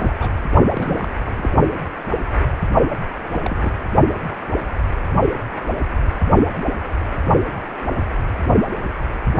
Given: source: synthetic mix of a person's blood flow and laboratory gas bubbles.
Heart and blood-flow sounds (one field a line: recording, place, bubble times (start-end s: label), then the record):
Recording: Doppler ultrasound of blood flow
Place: precordium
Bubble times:
0.00-0.15 s: bubbles
0.19-0.29 s: bubbles
0.73-1.08 s: bubbles
1.24-1.49 s: bubbles
3.33-3.41 s: bubbles
3.44-3.71 s: bubbles
From the record:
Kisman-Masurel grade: 221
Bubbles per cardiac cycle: several, 3 to 8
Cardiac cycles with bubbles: 10 to 50%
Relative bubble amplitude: barely perceptible (0.100 to 0.250)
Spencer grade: 2 (many but less than half of the cardiac periods contain bubble signals, singularly or in groups)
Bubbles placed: only in the low amplitude regions of the cardiac cycle